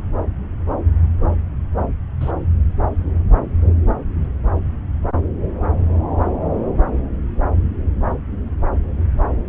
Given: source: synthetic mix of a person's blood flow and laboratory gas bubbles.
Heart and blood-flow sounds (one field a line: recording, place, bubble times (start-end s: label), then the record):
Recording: Doppler ultrasound of blood flow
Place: subclavian vein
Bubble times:
2.21-2.31 s: bubbles
From the record:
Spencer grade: 1 (occasional bubble signal discernible with the cardiac motion signal, with majority of cardiac periods free of bubbles)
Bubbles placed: anywhere in the cardiac cycle